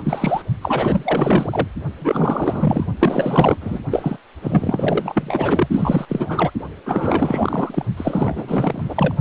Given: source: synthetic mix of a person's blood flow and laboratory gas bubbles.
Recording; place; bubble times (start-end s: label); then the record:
Doppler ultrasound of blood flow; precordium
0.04-0.42 s: bubbles
0.61-1.68 s: bubbles
2.00-2.84 s: bubbles
2.99-3.57 s: bubbles
3.60-3.80 s: bubbles
3.90-4.17 s: bubbles
4.42-5.68 s: bubbles
5.71-6.05 s: bubbles
6.08-6.51 s: bubbles
6.86-7.85 s: bubbles
7.96-9.15 s: bubbles
From the record:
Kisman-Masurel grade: 444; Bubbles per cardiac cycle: continuous sound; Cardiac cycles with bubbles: 100%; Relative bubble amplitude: maximal (0.775 to 0.999); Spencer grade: 4 (maximum detectable bubble signal sounding continuously throughout systole and diastole of every cardiac period, and overriding the amplitude of the normal cardiac signals); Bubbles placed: only in the low amplitude regions of the cardiac cycle